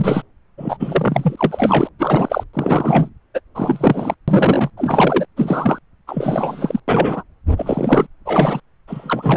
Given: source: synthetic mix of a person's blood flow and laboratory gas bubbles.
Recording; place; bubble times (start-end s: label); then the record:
Doppler ultrasound of blood flow; subclavian vein
0.00-0.22 s: bubbles
0.57-0.77 s: bubbles
0.80-1.89 s: bubbles
1.99-2.43 s: bubbles
2.53-3.09 s: bubbles
3.34-3.40 s: bubbles
3.54-4.14 s: bubbles
4.27-4.70 s: bubbles
4.77-5.25 s: bubbles
5.37-5.79 s: bubbles
6.07-6.80 s: bubbles
6.88-7.23 s: bubbles
7.56-8.06 s: bubbles
8.25-8.60 s: bubbles
8.88-9.37 s: bubbles
From the record:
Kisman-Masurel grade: 343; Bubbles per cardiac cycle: rolling drumbeat, 9 or more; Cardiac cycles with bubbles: 100%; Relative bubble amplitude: loud (0.450 to 0.775); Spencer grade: 3 (all of the cardiac periods contain showers or single bubble signals, but not dominating or overriding the cardiac motion signals); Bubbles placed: anywhere in the cardiac cycle